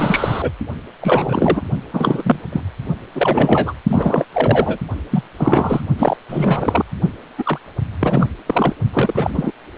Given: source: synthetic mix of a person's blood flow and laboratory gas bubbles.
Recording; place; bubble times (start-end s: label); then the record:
Doppler ultrasound of blood flow; precordium
0.00-0.52 s: bubbles
1.00-1.62 s: bubbles
1.93-2.40 s: bubbles
2.52-2.61 s: bubbles
3.15-3.73 s: bubbles
3.87-4.25 s: bubbles
4.33-4.78 s: bubbles
5.11-5.24 s: bubbles
5.38-5.82 s: bubbles
5.98-6.17 s: bubbles
6.29-6.84 s: bubbles
7.38-7.58 s: bubbles
8.00-8.27 s: bubbles
8.46-8.75 s: bubbles
8.93-9.52 s: bubbles
From the record:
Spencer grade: 3 (all of the cardiac periods contain showers or single bubble signals, but not dominating or overriding the cardiac motion signals); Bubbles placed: only in the low amplitude regions of the cardiac cycle